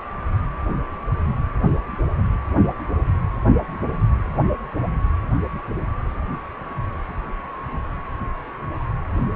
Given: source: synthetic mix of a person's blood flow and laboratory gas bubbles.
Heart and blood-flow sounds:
Doppler ultrasound of blood flow; precordium
no bubbles
From the record:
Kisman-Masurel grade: 000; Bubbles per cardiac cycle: 0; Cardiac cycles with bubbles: 0%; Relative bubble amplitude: no bubbles discernible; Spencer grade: 0 (complete lack of bubble signals)

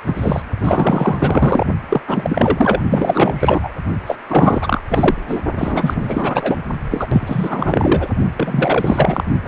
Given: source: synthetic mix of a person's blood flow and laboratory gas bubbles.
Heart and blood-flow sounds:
Doppler ultrasound of blood flow; precordium
0.07-0.42 s: bubbles
0.61-1.66 s: bubbles
1.89-2.01 s: bubbles
2.07-2.81 s: bubbles
2.90-3.73 s: bubbles
4.06-4.16 s: bubbles
4.29-4.80 s: bubbles
4.89-5.15 s: bubbles
5.28-5.41 s: bubbles
5.58-6.58 s: bubbles
6.91-7.08 s: bubbles
7.10-8.13 s: bubbles
8.36-9.24 s: bubbles
9.45-9.48 s: bubbles
From the record:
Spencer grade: 4 (maximum detectable bubble signal sounding continuously throughout systole and diastole of every cardiac period, and overriding the amplitude of the normal cardiac signals); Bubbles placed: only in the low amplitude regions of the cardiac cycle

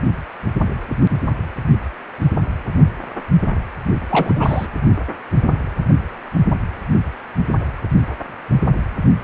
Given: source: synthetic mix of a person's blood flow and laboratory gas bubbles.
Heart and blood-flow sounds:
Doppler ultrasound of blood flow; precordium
4.10-4.67 s: bubbles
From the record:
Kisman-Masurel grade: 212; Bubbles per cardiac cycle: several, 3 to 8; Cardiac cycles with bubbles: 1 to 10%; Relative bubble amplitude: moderate (0.250 to 0.450); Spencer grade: 1 (occasional bubble signal discernible with the cardiac motion signal, with majority of cardiac periods free of bubbles); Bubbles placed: only in the low amplitude regions of the cardiac cycle

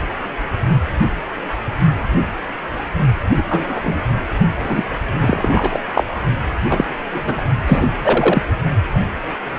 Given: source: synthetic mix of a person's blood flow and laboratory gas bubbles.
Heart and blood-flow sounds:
Doppler ultrasound of blood flow; precordium
3.37-3.43 s: bubbles
3.49-4.03 s: bubbles
4.60-4.83 s: bubbles
5.21-5.79 s: bubbles
5.94-6.04 s: bubbles
6.69-6.85 s: bubbles
7.13-7.42 s: bubbles
7.67-7.91 s: bubbles
8.02-8.43 s: bubbles
From the record:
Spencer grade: 2 (many but less than half of the cardiac periods contain bubble signals, singularly or in groups); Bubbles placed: only in the low amplitude regions of the cardiac cycle

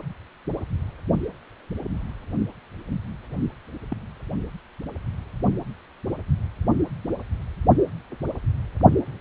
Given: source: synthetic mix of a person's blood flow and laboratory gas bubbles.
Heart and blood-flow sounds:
Doppler ultrasound of blood flow; precordium
3.90-3.99 s: bubbles
From the record:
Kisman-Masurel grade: 121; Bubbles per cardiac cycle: 1 to 2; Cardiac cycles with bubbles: 10 to 50%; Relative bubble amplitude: barely perceptible (0.100 to 0.250); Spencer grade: 2 (many but less than half of the cardiac periods contain bubble signals, singularly or in groups); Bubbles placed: only in the low amplitude regions of the cardiac cycle

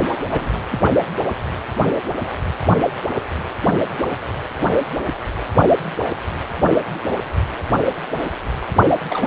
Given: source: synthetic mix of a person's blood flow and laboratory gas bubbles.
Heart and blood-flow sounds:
Doppler ultrasound of blood flow; precordium
0.31-0.52 s: bubbles
0.71-0.81 s: bubbles
9.07-9.27 s: bubbles
From the record:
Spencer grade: 2 (many but less than half of the cardiac periods contain bubble signals, singularly or in groups); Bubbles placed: only in the low amplitude regions of the cardiac cycle

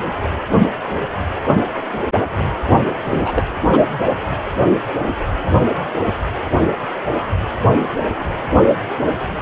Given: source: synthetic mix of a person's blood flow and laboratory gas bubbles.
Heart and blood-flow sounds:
Doppler ultrasound of blood flow; precordium
3.04-3.48 s: bubbles
3.71-3.84 s: bubbles
From the record:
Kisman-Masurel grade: 222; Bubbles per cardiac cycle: several, 3 to 8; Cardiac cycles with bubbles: 10 to 50%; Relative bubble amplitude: moderate (0.250 to 0.450); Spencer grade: 2 (many but less than half of the cardiac periods contain bubble signals, singularly or in groups); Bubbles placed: anywhere in the cardiac cycle

